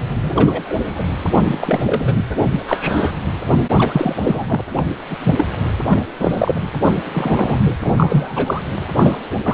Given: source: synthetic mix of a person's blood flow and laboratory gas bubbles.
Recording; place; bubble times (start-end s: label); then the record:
Doppler ultrasound of blood flow; precordium
0.21-0.74 s: bubbles
0.82-1.09 s: bubbles
1.34-2.23 s: bubbles
2.50-3.11 s: bubbles
3.76-4.46 s: bubbles
4.48-4.61 s: bubbles
4.76-4.82 s: bubbles
5.09-5.17 s: bubbles
5.24-5.46 s: bubbles
5.88-5.99 s: bubbles
6.19-6.70 s: bubbles
6.82-7.11 s: bubbles
7.13-7.75 s: bubbles
7.84-7.92 s: bubbles
7.96-8.62 s: bubbles
8.94-9.17 s: bubbles
9.44-9.54 s: bubbles
From the record:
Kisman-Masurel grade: 243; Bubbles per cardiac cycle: several, 3 to 8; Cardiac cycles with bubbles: 100%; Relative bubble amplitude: loud (0.450 to 0.775); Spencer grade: 3 (all of the cardiac periods contain showers or single bubble signals, but not dominating or overriding the cardiac motion signals); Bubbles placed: anywhere in the cardiac cycle